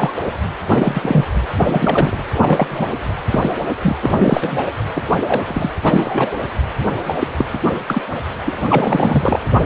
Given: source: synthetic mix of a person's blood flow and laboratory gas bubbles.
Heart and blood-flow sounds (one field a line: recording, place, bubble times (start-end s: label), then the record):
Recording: Doppler ultrasound of blood flow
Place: precordium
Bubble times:
0.00-0.14 s: bubbles
0.67-1.24 s: bubbles
1.56-2.23 s: bubbles
2.34-2.67 s: bubbles
2.71-2.93 s: bubbles
3.30-3.51 s: bubbles
3.82-3.96 s: bubbles
4.01-4.14 s: bubbles
4.19-4.71 s: bubbles
4.94-5.04 s: bubbles
5.28-5.42 s: bubbles
5.46-5.71 s: bubbles
5.83-6.40 s: bubbles
7.07-7.17 s: bubbles
7.19-7.27 s: bubbles
7.38-7.46 s: bubbles
7.53-7.61 s: bubbles
7.65-7.71 s: bubbles
7.87-8.02 s: bubbles
8.46-8.53 s: bubbles
8.69-9.39 s: bubbles
From the record:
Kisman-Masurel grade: 243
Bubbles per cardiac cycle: several, 3 to 8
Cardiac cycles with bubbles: 100%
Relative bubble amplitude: loud (0.450 to 0.775)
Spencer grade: 3 (all of the cardiac periods contain showers or single bubble signals, but not dominating or overriding the cardiac motion signals)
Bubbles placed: anywhere in the cardiac cycle